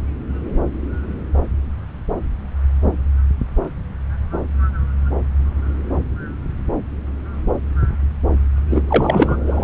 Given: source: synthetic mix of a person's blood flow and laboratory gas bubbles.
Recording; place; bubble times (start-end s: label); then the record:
Doppler ultrasound of blood flow; subclavian vein
8.69-8.82 s: bubbles
8.88-9.38 s: bubbles
9.46-9.64 s: bubbles
From the record:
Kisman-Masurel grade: 213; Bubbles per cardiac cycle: several, 3 to 8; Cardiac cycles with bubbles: 1 to 10%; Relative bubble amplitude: loud (0.450 to 0.775); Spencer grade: 1 (occasional bubble signal discernible with the cardiac motion signal, with majority of cardiac periods free of bubbles); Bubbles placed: anywhere in the cardiac cycle